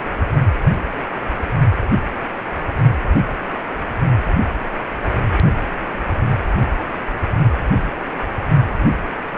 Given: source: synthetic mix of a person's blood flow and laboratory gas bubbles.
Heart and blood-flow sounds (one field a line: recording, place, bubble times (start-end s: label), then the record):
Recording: Doppler ultrasound of blood flow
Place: precordium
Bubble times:
no bubbles
From the record:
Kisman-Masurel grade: 000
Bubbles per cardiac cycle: 0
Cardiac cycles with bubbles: 0%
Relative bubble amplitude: no bubbles discernible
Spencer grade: 0 (complete lack of bubble signals)